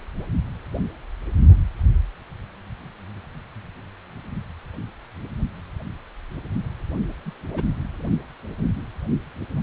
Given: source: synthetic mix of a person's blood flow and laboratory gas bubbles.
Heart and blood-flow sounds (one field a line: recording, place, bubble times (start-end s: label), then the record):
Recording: Doppler ultrasound of blood flow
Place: precordium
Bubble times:
1.49-1.56 s: bubbles
7.25-7.32 s: bubbles
7.53-7.64 s: bubbles
From the record:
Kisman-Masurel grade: 121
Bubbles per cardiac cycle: 1 to 2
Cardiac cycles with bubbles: 10 to 50%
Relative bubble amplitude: barely perceptible (0.100 to 0.250)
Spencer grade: 2 (many but less than half of the cardiac periods contain bubble signals, singularly or in groups)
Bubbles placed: anywhere in the cardiac cycle